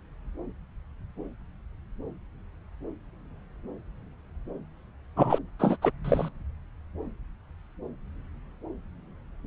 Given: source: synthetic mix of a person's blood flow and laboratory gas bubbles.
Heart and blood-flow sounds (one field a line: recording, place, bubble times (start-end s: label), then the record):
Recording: Doppler ultrasound of blood flow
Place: subclavian vein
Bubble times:
5.16-5.39 s: bubbles
5.59-5.77 s: bubbles
5.82-5.91 s: bubbles
6.04-6.29 s: bubbles
From the record:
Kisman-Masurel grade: 212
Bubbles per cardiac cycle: several, 3 to 8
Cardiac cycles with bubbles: 1 to 10%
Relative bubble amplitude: moderate (0.250 to 0.450)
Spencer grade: 1 (occasional bubble signal discernible with the cardiac motion signal, with majority of cardiac periods free of bubbles)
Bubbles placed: anywhere in the cardiac cycle